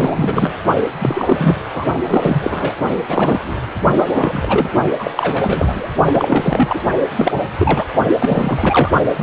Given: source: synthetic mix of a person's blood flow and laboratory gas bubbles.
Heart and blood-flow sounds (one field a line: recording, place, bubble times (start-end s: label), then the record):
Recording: Doppler ultrasound of blood flow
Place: precordium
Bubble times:
0.00-0.13 s: bubbles
0.16-0.53 s: bubbles
0.94-1.56 s: bubbles
1.73-1.84 s: bubbles
2.06-2.73 s: bubbles
3.08-3.65 s: bubbles
3.97-4.07 s: bubbles
4.15-4.69 s: bubbles
4.99-5.11 s: bubbles
5.16-5.90 s: bubbles
6.14-6.80 s: bubbles
7.17-7.33 s: bubbles
7.58-7.86 s: bubbles
8.19-8.91 s: bubbles
9.13-9.23 s: bubbles
From the record:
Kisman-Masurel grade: 343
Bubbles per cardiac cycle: rolling drumbeat, 9 or more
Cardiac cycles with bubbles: 100%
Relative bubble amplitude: loud (0.450 to 0.775)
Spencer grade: 3 (all of the cardiac periods contain showers or single bubble signals, but not dominating or overriding the cardiac motion signals)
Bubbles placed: only in the low amplitude regions of the cardiac cycle